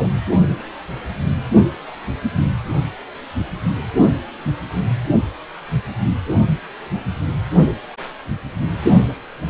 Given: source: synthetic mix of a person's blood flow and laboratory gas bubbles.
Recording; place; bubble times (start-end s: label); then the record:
Doppler ultrasound of blood flow; precordium
0.00-0.09 s: bubbles
From the record:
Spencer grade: 1 (occasional bubble signal discernible with the cardiac motion signal, with majority of cardiac periods free of bubbles); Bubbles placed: only in the low amplitude regions of the cardiac cycle